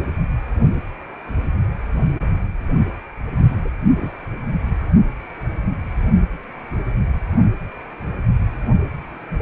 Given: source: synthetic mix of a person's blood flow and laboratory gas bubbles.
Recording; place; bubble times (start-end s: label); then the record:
Doppler ultrasound of blood flow; precordium
3.63-4.10 s: bubbles
From the record:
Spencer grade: 1 (occasional bubble signal discernible with the cardiac motion signal, with majority of cardiac periods free of bubbles); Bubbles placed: only in the low amplitude regions of the cardiac cycle